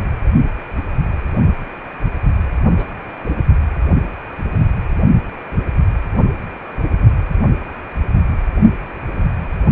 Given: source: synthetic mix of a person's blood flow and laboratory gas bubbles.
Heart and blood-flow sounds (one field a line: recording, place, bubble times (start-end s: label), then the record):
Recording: Doppler ultrasound of blood flow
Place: precordium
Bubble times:
2.76-2.87 s: bubbles
3.25-3.30 s: bubbles
From the record:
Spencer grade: 1 (occasional bubble signal discernible with the cardiac motion signal, with majority of cardiac periods free of bubbles)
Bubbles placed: anywhere in the cardiac cycle